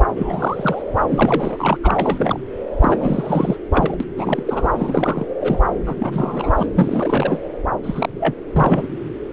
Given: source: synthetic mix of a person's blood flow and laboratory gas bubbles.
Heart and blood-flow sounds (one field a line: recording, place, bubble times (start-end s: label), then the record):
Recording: Doppler ultrasound of blood flow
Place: subclavian vein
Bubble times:
0.00-0.04 s: bubbles
0.16-0.83 s: bubbles
1.10-1.77 s: bubbles
1.83-2.40 s: bubbles
2.81-3.56 s: bubbles
3.72-3.97 s: bubbles
4.00-4.05 s: bubbles
4.17-4.42 s: bubbles
4.46-4.71 s: bubbles
4.76-5.26 s: bubbles
5.40-5.59 s: bubbles
5.86-5.96 s: bubbles
5.99-6.68 s: bubbles
6.77-7.39 s: bubbles
7.83-8.36 s: bubbles
8.53-8.87 s: bubbles
From the record:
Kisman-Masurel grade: 342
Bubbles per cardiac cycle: rolling drumbeat, 9 or more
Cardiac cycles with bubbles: 100%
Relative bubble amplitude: moderate (0.250 to 0.450)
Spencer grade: 3 (all of the cardiac periods contain showers or single bubble signals, but not dominating or overriding the cardiac motion signals)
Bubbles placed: anywhere in the cardiac cycle